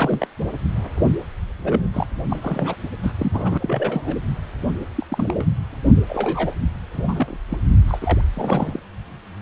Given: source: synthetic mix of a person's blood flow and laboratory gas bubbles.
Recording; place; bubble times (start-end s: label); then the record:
Doppler ultrasound of blood flow; precordium
0.00-0.27 s: bubbles
1.64-1.87 s: bubbles
1.94-2.07 s: bubbles
2.30-2.39 s: bubbles
2.42-2.75 s: bubbles
3.02-3.12 s: bubbles
3.19-3.58 s: bubbles
3.60-4.16 s: bubbles
4.96-5.06 s: bubbles
5.10-5.46 s: bubbles
6.07-6.51 s: bubbles
6.92-7.37 s: bubbles
7.50-7.58 s: bubbles
7.87-7.99 s: bubbles
8.01-8.21 s: bubbles
8.33-8.80 s: bubbles
From the record:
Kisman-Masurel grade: 232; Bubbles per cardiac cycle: several, 3 to 8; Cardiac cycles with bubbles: 50 to 99%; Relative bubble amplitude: moderate (0.250 to 0.450); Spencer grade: 3 (all of the cardiac periods contain showers or single bubble signals, but not dominating or overriding the cardiac motion signals); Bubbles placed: anywhere in the cardiac cycle